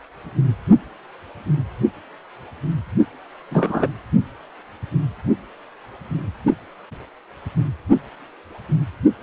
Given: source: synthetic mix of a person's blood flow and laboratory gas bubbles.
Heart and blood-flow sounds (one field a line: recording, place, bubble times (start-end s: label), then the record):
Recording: Doppler ultrasound of blood flow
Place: precordium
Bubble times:
3.51-3.88 s: bubbles
From the record:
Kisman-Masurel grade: 113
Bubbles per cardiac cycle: 1 to 2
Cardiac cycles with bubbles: 1 to 10%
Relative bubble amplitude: loud (0.450 to 0.775)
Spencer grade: 1 (occasional bubble signal discernible with the cardiac motion signal, with majority of cardiac periods free of bubbles)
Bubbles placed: only in the low amplitude regions of the cardiac cycle